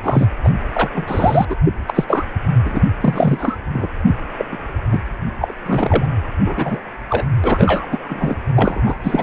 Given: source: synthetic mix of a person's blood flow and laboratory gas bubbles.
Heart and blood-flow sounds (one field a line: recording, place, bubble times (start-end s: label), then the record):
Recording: Doppler ultrasound of blood flow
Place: precordium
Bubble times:
0.03-0.27 s: bubbles
0.43-0.49 s: bubbles
0.73-0.90 s: bubbles
0.94-1.56 s: bubbles
1.65-1.74 s: bubbles
1.87-2.04 s: bubbles
2.08-2.25 s: bubbles
2.65-2.81 s: bubbles
3.01-3.56 s: bubbles
3.74-3.87 s: bubbles
4.38-4.46 s: bubbles
4.52-4.57 s: bubbles
4.92-5.00 s: bubbles
5.41-5.54 s: bubbles
5.66-6.05 s: bubbles
6.45-6.82 s: bubbles
7.09-7.25 s: bubbles
7.44-7.87 s: bubbles
7.92-7.98 s: bubbles
8.09-8.35 s: bubbles
8.55-8.96 s: bubbles
9.04-9.23 s: bubbles
From the record:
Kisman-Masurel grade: 243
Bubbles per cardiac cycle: several, 3 to 8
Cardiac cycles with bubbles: 100%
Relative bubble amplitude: loud (0.450 to 0.775)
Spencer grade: 3 (all of the cardiac periods contain showers or single bubble signals, but not dominating or overriding the cardiac motion signals)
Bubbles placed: anywhere in the cardiac cycle